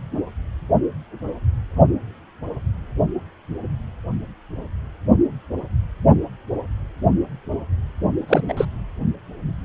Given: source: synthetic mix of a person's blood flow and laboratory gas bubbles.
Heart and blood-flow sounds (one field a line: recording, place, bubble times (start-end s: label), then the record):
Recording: Doppler ultrasound of blood flow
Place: precordium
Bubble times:
8.28-8.42 s: bubbles
8.48-8.54 s: bubbles
8.56-8.65 s: bubbles
From the record:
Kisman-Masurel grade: 223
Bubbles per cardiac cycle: several, 3 to 8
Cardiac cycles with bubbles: 10 to 50%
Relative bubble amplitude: loud (0.450 to 0.775)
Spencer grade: 2 (many but less than half of the cardiac periods contain bubble signals, singularly or in groups)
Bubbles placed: only in the low amplitude regions of the cardiac cycle